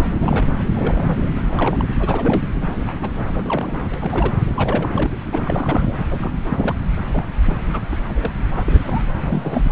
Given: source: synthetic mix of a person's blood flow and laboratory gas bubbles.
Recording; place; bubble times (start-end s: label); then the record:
Doppler ultrasound of blood flow; subclavian vein
0.11-0.49 s: bubbles
0.73-1.32 s: bubbles
1.35-1.89 s: bubbles
1.99-2.42 s: bubbles
2.67-2.96 s: bubbles
3.02-3.10 s: bubbles
3.27-3.80 s: bubbles
3.93-4.33 s: bubbles
4.54-5.17 s: bubbles
5.32-5.93 s: bubbles
6.09-6.31 s: bubbles
6.48-6.75 s: bubbles
7.12-7.25 s: bubbles
7.45-7.56 s: bubbles
7.72-7.82 s: bubbles
7.91-7.96 s: bubbles
8.20-8.31 s: bubbles
8.56-9.04 s: bubbles
9.23-9.62 s: bubbles
From the record:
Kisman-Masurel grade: 232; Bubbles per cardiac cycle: several, 3 to 8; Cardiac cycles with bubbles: 50 to 99%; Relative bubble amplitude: moderate (0.250 to 0.450); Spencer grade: 3 (all of the cardiac periods contain showers or single bubble signals, but not dominating or overriding the cardiac motion signals); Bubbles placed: anywhere in the cardiac cycle